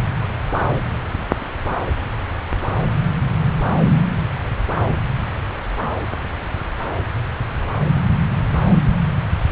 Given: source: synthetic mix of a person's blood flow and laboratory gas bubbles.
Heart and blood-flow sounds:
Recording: Doppler ultrasound of blood flow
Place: subclavian vein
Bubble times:
no bubbles
From the record:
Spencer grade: 0 (complete lack of bubble signals)

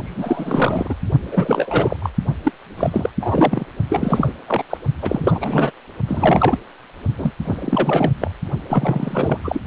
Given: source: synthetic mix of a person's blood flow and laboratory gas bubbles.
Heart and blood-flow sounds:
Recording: Doppler ultrasound of blood flow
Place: precordium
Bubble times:
0.05-0.94 s: bubbles
1.32-1.97 s: bubbles
2.02-2.10 s: bubbles
2.44-2.52 s: bubbles
2.77-3.10 s: bubbles
3.20-3.66 s: bubbles
3.90-4.33 s: bubbles
4.46-4.63 s: bubbles
4.70-4.78 s: bubbles
5.01-5.71 s: bubbles
6.08-6.58 s: bubbles
7.18-7.32 s: bubbles
7.44-8.12 s: bubbles
8.21-8.31 s: bubbles
8.69-9.39 s: bubbles
9.44-9.61 s: bubbles
From the record:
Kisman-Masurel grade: 343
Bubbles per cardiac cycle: rolling drumbeat, 9 or more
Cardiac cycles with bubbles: 100%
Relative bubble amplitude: loud (0.450 to 0.775)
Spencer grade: 3 (all of the cardiac periods contain showers or single bubble signals, but not dominating or overriding the cardiac motion signals)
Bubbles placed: only in the low amplitude regions of the cardiac cycle

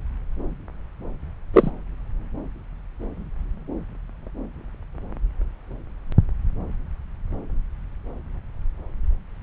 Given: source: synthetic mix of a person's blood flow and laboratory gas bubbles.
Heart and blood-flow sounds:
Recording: Doppler ultrasound of blood flow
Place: subclavian vein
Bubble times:
1.53-1.71 s: bubbles
From the record:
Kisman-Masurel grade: 113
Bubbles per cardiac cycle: 1 to 2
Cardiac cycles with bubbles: 1 to 10%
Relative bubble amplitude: loud (0.450 to 0.775)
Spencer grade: 1 (occasional bubble signal discernible with the cardiac motion signal, with majority of cardiac periods free of bubbles)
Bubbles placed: anywhere in the cardiac cycle

